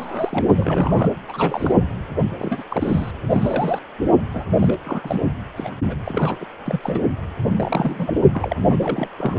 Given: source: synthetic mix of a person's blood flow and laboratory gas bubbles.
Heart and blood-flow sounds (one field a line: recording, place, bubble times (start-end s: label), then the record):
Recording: Doppler ultrasound of blood flow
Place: precordium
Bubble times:
0.00-1.11 s: bubbles
1.28-1.74 s: bubbles
2.38-2.65 s: bubbles
2.69-3.12 s: bubbles
3.31-3.80 s: bubbles
4.32-4.44 s: bubbles
4.59-4.78 s: bubbles
4.84-5.21 s: bubbles
5.56-5.71 s: bubbles
5.86-5.95 s: bubbles
6.04-6.38 s: bubbles
6.40-6.46 s: bubbles
6.66-6.80 s: bubbles
6.82-7.06 s: bubbles
7.58-8.21 s: bubbles
8.31-8.56 s: bubbles
8.69-9.08 s: bubbles
9.17-9.39 s: bubbles
From the record:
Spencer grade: 3 (all of the cardiac periods contain showers or single bubble signals, but not dominating or overriding the cardiac motion signals)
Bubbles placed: anywhere in the cardiac cycle